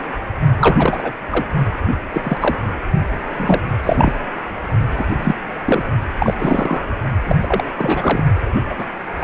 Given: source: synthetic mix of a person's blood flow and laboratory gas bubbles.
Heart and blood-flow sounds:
Doppler ultrasound of blood flow; precordium
0.59-1.13 s: bubbles
1.30-1.46 s: bubbles
2.12-2.37 s: bubbles
2.41-2.56 s: bubbles
3.37-3.61 s: bubbles
3.83-4.13 s: bubbles
4.96-5.06 s: bubbles
5.17-5.34 s: bubbles
5.66-5.83 s: bubbles
6.19-6.34 s: bubbles
6.38-6.83 s: bubbles
7.25-7.36 s: bubbles
7.41-7.64 s: bubbles
7.76-8.22 s: bubbles
8.69-8.75 s: bubbles
8.78-8.85 s: bubbles
9.20-9.24 s: bubbles
From the record:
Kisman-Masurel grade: 243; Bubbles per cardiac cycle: several, 3 to 8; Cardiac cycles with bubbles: 100%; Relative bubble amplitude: loud (0.450 to 0.775); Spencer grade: 3 (all of the cardiac periods contain showers or single bubble signals, but not dominating or overriding the cardiac motion signals); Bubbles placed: only in the low amplitude regions of the cardiac cycle

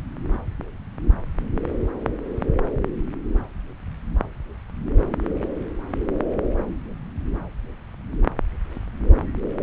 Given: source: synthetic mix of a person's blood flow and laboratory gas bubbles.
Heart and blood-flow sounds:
Doppler ultrasound of blood flow; subclavian vein
no bubbles
From the record:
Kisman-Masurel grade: 000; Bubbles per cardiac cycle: 0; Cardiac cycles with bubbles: 0%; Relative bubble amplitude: no bubbles discernible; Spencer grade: 0 (complete lack of bubble signals)

